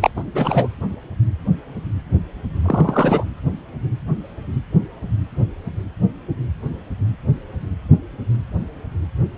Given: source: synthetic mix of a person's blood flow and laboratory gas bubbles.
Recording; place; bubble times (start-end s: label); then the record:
Doppler ultrasound of blood flow; precordium
0.01-0.10 s: bubbles
0.15-0.68 s: bubbles
2.65-3.24 s: bubbles
From the record:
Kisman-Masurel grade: 223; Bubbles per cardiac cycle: several, 3 to 8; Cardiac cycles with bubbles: 10 to 50%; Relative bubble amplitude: loud (0.450 to 0.775); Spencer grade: 2 (many but less than half of the cardiac periods contain bubble signals, singularly or in groups); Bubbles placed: anywhere in the cardiac cycle